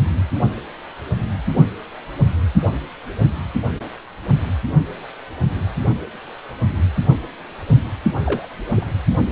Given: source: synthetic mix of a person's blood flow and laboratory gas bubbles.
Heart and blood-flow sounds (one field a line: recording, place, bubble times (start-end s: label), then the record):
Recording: Doppler ultrasound of blood flow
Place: precordium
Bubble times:
8.25-8.48 s: bubbles
8.76-8.90 s: bubbles
From the record:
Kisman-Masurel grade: 111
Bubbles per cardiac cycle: 1 to 2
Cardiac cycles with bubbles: 1 to 10%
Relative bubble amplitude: barely perceptible (0.100 to 0.250)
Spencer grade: 1 (occasional bubble signal discernible with the cardiac motion signal, with majority of cardiac periods free of bubbles)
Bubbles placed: only in the low amplitude regions of the cardiac cycle